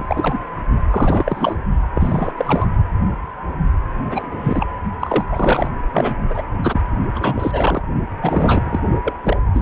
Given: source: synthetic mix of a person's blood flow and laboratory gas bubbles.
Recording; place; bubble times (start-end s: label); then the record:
Doppler ultrasound of blood flow; precordium
0.00-0.06 s: bubbles
0.08-0.38 s: bubbles
0.90-1.56 s: bubbles
1.94-2.33 s: bubbles
2.37-2.68 s: bubbles
4.04-4.67 s: bubbles
5.00-5.25 s: bubbles
5.28-5.71 s: bubbles
5.94-6.15 s: bubbles
6.30-6.42 s: bubbles
6.62-6.81 s: bubbles
7.15-7.82 s: bubbles
8.22-8.79 s: bubbles
9.04-9.17 s: bubbles
9.23-9.37 s: bubbles
9.54-9.62 s: bubbles
From the record:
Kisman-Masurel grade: 332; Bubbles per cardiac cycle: rolling drumbeat, 9 or more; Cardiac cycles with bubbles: 50 to 99%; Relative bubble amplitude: moderate (0.250 to 0.450); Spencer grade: 3 (all of the cardiac periods contain showers or single bubble signals, but not dominating or overriding the cardiac motion signals); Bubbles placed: only in the low amplitude regions of the cardiac cycle